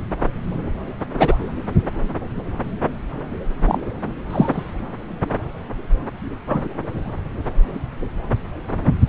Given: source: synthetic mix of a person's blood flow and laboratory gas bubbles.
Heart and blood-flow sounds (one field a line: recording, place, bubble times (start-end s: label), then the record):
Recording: Doppler ultrasound of blood flow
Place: subclavian vein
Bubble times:
1.19-1.35 s: bubbles
3.65-3.80 s: bubbles
4.30-4.71 s: bubbles
6.46-6.68 s: bubbles
From the record:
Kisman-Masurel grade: 123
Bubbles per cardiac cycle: 1 to 2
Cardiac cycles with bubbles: 10 to 50%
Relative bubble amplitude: loud (0.450 to 0.775)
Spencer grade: 2 (many but less than half of the cardiac periods contain bubble signals, singularly or in groups)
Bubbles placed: anywhere in the cardiac cycle